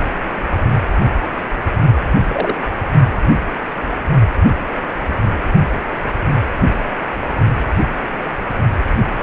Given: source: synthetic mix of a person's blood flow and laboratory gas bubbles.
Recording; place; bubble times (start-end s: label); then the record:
Doppler ultrasound of blood flow; precordium
2.27-2.56 s: bubbles
From the record:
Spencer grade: 1 (occasional bubble signal discernible with the cardiac motion signal, with majority of cardiac periods free of bubbles); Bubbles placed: only in the low amplitude regions of the cardiac cycle